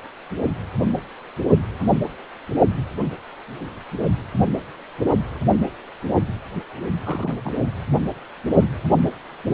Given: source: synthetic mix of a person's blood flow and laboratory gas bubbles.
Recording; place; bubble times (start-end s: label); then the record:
Doppler ultrasound of blood flow; precordium
7.03-7.35 s: bubbles
7.44-7.52 s: bubbles
From the record:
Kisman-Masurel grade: 211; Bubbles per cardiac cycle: several, 3 to 8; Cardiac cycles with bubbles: 1 to 10%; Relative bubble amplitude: barely perceptible (0.100 to 0.250); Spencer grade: 1 (occasional bubble signal discernible with the cardiac motion signal, with majority of cardiac periods free of bubbles); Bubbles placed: only in the low amplitude regions of the cardiac cycle